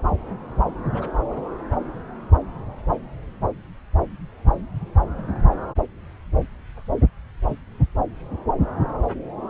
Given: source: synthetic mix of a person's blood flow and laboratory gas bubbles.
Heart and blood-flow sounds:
Doppler ultrasound of blood flow; subclavian vein
0.92-1.13 s: bubbles
1.30-1.42 s: bubbles
5.18-5.24 s: bubbles
5.28-5.33 s: bubbles
7.46-7.59 s: bubbles
From the record:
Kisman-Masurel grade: 121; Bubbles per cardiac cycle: 1 to 2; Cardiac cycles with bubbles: 10 to 50%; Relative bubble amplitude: barely perceptible (0.100 to 0.250); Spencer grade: 2 (many but less than half of the cardiac periods contain bubble signals, singularly or in groups); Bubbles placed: anywhere in the cardiac cycle

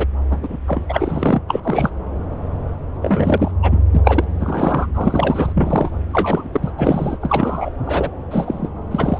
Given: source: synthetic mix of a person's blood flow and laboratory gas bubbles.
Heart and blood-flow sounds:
Doppler ultrasound of blood flow; subclavian vein
0.00-0.05 s: bubbles
0.26-0.57 s: bubbles
0.67-0.84 s: bubbles
0.89-1.40 s: bubbles
1.48-1.60 s: bubbles
1.63-1.90 s: bubbles
3.02-3.52 s: bubbles
3.62-3.85 s: bubbles
3.92-4.01 s: bubbles
4.04-4.24 s: bubbles
4.38-4.87 s: bubbles
4.94-5.52 s: bubbles
5.56-5.90 s: bubbles
6.12-6.73 s: bubbles
6.78-7.17 s: bubbles
7.21-7.70 s: bubbles
7.84-8.10 s: bubbles
8.30-8.70 s: bubbles
8.91-9.19 s: bubbles
From the record:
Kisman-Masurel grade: 233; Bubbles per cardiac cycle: several, 3 to 8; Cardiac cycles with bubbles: 50 to 99%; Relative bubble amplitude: loud (0.450 to 0.775); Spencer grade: 3 (all of the cardiac periods contain showers or single bubble signals, but not dominating or overriding the cardiac motion signals); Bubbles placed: anywhere in the cardiac cycle

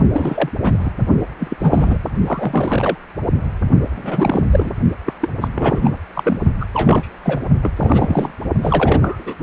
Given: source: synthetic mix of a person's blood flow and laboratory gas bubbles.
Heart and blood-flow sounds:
Doppler ultrasound of blood flow; precordium
0.14-0.50 s: bubbles
0.62-0.90 s: bubbles
1.40-1.98 s: bubbles
2.03-2.09 s: bubbles
2.26-2.98 s: bubbles
3.96-4.43 s: bubbles
4.51-4.71 s: bubbles
5.05-5.13 s: bubbles
5.21-5.29 s: bubbles
5.41-5.48 s: bubbles
5.54-5.99 s: bubbles
6.14-6.39 s: bubbles
6.59-6.66 s: bubbles
6.74-7.08 s: bubbles
7.24-7.40 s: bubbles
7.62-7.71 s: bubbles
7.75-8.32 s: bubbles
8.62-9.35 s: bubbles
From the record:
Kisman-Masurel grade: 342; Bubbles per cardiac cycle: rolling drumbeat, 9 or more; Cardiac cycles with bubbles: 100%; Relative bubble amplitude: moderate (0.250 to 0.450); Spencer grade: 3 (all of the cardiac periods contain showers or single bubble signals, but not dominating or overriding the cardiac motion signals); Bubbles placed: only in the low amplitude regions of the cardiac cycle

